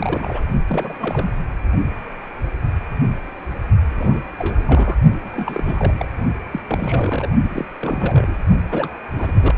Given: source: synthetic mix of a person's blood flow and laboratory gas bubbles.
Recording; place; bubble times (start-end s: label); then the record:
Doppler ultrasound of blood flow; precordium
0.00-0.42 s: bubbles
0.69-1.30 s: bubbles
3.90-4.20 s: bubbles
4.38-4.95 s: bubbles
5.24-5.94 s: bubbles
5.98-6.06 s: bubbles
6.51-6.62 s: bubbles
6.68-7.30 s: bubbles
7.51-7.65 s: bubbles
7.80-8.34 s: bubbles
8.69-8.88 s: bubbles
9.12-9.54 s: bubbles
From the record:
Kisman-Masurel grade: 332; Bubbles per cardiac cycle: rolling drumbeat, 9 or more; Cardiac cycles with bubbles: 50 to 99%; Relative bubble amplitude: moderate (0.250 to 0.450); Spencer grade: 3 (all of the cardiac periods contain showers or single bubble signals, but not dominating or overriding the cardiac motion signals); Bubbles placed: only in the low amplitude regions of the cardiac cycle